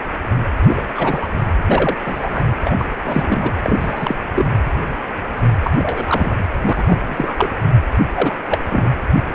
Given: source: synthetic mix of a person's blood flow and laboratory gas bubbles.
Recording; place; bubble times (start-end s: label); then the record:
Doppler ultrasound of blood flow; precordium
0.67-0.82 s: bubbles
0.87-1.32 s: bubbles
1.68-1.97 s: bubbles
2.04-2.44 s: bubbles
2.65-2.88 s: bubbles
3.04-3.54 s: bubbles
3.62-4.16 s: bubbles
4.34-4.61 s: bubbles
5.63-5.71 s: bubbles
5.78-6.33 s: bubbles
6.64-6.84 s: bubbles
6.87-6.99 s: bubbles
7.06-7.49 s: bubbles
8.14-8.35 s: bubbles
8.51-8.58 s: bubbles
8.69-8.92 s: bubbles
From the record:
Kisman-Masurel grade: 232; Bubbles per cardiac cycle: several, 3 to 8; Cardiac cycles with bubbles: 50 to 99%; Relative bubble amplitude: moderate (0.250 to 0.450); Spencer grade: 3 (all of the cardiac periods contain showers or single bubble signals, but not dominating or overriding the cardiac motion signals); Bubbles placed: anywhere in the cardiac cycle